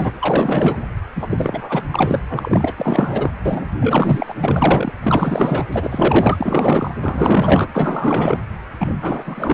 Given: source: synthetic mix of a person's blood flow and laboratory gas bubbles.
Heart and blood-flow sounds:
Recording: Doppler ultrasound of blood flow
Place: precordium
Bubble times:
0.00-0.11 s: bubbles
0.19-0.79 s: bubbles
1.15-1.27 s: bubbles
1.30-1.82 s: bubbles
1.92-2.19 s: bubbles
2.29-3.31 s: bubbles
3.45-3.69 s: bubbles
3.79-4.35 s: bubbles
4.41-4.92 s: bubbles
5.03-5.66 s: bubbles
5.72-6.94 s: bubbles
7.03-7.70 s: bubbles
7.73-8.38 s: bubbles
8.79-8.94 s: bubbles
9.01-9.54 s: bubbles
From the record:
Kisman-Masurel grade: 444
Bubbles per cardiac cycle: continuous sound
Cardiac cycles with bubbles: 100%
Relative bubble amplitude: maximal (0.775 to 0.999)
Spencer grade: 4 (maximum detectable bubble signal sounding continuously throughout systole and diastole of every cardiac period, and overriding the amplitude of the normal cardiac signals)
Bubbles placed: anywhere in the cardiac cycle

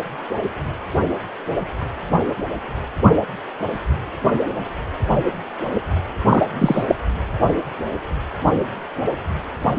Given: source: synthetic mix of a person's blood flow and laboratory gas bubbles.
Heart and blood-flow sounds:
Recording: Doppler ultrasound of blood flow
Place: precordium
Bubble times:
6.28-6.43 s: bubbles
6.58-6.83 s: bubbles
6.88-6.95 s: bubbles
From the record:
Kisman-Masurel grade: 213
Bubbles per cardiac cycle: several, 3 to 8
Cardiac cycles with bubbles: 1 to 10%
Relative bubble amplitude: loud (0.450 to 0.775)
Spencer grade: 1 (occasional bubble signal discernible with the cardiac motion signal, with majority of cardiac periods free of bubbles)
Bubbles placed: anywhere in the cardiac cycle

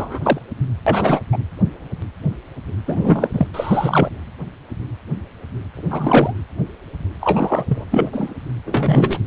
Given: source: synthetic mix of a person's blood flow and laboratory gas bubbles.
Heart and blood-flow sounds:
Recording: Doppler ultrasound of blood flow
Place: precordium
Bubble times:
0.00-0.19 s: bubbles
0.22-0.39 s: bubbles
0.86-1.20 s: bubbles
1.31-1.38 s: bubbles
2.85-3.29 s: bubbles
3.33-3.47 s: bubbles
3.54-4.10 s: bubbles
5.73-6.33 s: bubbles
7.21-7.64 s: bubbles
7.68-7.84 s: bubbles
7.90-8.09 s: bubbles
8.12-8.34 s: bubbles
8.65-9.19 s: bubbles
From the record:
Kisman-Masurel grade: 233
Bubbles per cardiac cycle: several, 3 to 8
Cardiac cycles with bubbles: 50 to 99%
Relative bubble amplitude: loud (0.450 to 0.775)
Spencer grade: 3 (all of the cardiac periods contain showers or single bubble signals, but not dominating or overriding the cardiac motion signals)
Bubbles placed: anywhere in the cardiac cycle

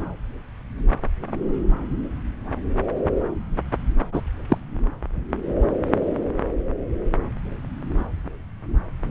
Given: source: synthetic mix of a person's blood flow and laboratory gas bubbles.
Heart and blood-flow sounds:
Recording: Doppler ultrasound of blood flow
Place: subclavian vein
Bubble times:
4.13-4.21 s: bubbles
4.48-4.58 s: bubbles
From the record:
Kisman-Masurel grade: 113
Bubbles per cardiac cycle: 1 to 2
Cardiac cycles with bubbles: 1 to 10%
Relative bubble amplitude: loud (0.450 to 0.775)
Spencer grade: 1 (occasional bubble signal discernible with the cardiac motion signal, with majority of cardiac periods free of bubbles)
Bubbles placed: anywhere in the cardiac cycle

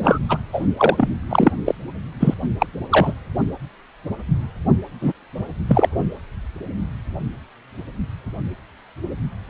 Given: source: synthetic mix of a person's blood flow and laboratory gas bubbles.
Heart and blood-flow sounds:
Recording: Doppler ultrasound of blood flow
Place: precordium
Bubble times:
0.02-0.18 s: bubbles
0.28-0.37 s: bubbles
0.53-0.61 s: bubbles
0.77-1.08 s: bubbles
1.29-1.52 s: bubbles
1.66-1.75 s: bubbles
2.19-2.34 s: bubbles
2.58-2.67 s: bubbles
2.91-3.13 s: bubbles
5.01-5.12 s: bubbles
5.68-5.89 s: bubbles
From the record:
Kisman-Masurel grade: 223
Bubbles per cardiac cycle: several, 3 to 8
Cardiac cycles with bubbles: 10 to 50%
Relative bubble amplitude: loud (0.450 to 0.775)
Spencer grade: 2 (many but less than half of the cardiac periods contain bubble signals, singularly or in groups)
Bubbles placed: only in the low amplitude regions of the cardiac cycle

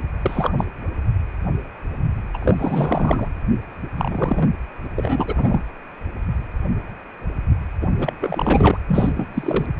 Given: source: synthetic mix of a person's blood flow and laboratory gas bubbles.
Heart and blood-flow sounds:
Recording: Doppler ultrasound of blood flow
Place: precordium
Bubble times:
0.21-0.55 s: bubbles
0.57-0.65 s: bubbles
2.33-2.38 s: bubbles
2.42-3.28 s: bubbles
3.97-4.50 s: bubbles
4.96-5.63 s: bubbles
7.81-7.88 s: bubbles
7.98-8.13 s: bubbles
8.21-8.77 s: bubbles
8.89-9.27 s: bubbles
9.34-9.66 s: bubbles
From the record:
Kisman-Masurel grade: 333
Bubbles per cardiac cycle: rolling drumbeat, 9 or more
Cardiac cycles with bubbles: 50 to 99%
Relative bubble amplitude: loud (0.450 to 0.775)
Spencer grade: 3 (all of the cardiac periods contain showers or single bubble signals, but not dominating or overriding the cardiac motion signals)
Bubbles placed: anywhere in the cardiac cycle

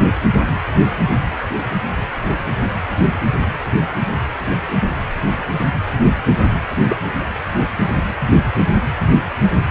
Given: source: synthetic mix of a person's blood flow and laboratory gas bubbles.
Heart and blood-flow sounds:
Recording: Doppler ultrasound of blood flow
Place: precordium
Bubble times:
6.88-6.97 s: bubbles
From the record:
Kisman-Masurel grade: 122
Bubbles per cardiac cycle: 1 to 2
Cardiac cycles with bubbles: 10 to 50%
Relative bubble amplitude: moderate (0.250 to 0.450)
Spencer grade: 2 (many but less than half of the cardiac periods contain bubble signals, singularly or in groups)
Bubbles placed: anywhere in the cardiac cycle

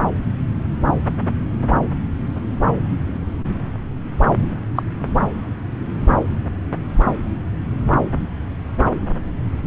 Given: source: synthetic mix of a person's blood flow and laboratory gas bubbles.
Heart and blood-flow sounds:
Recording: Doppler ultrasound of blood flow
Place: subclavian vein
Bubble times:
4.75-4.83 s: bubbles
From the record:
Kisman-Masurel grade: 112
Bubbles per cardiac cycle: 1 to 2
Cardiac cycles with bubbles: 1 to 10%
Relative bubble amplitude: moderate (0.250 to 0.450)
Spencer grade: 1 (occasional bubble signal discernible with the cardiac motion signal, with majority of cardiac periods free of bubbles)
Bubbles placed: anywhere in the cardiac cycle

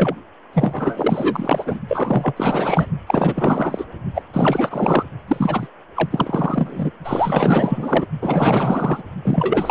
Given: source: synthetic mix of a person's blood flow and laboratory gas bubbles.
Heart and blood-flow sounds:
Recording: Doppler ultrasound of blood flow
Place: precordium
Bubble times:
0.00-0.15 s: bubbles
0.53-1.79 s: bubbles
1.88-2.33 s: bubbles
2.36-2.87 s: bubbles
3.06-3.85 s: bubbles
4.14-4.22 s: bubbles
4.33-5.04 s: bubbles
5.28-5.68 s: bubbles
5.96-6.91 s: bubbles
7.04-8.09 s: bubbles
8.21-9.03 s: bubbles
9.24-9.71 s: bubbles
From the record:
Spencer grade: 4 (maximum detectable bubble signal sounding continuously throughout systole and diastole of every cardiac period, and overriding the amplitude of the normal cardiac signals)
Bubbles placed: only in the low amplitude regions of the cardiac cycle

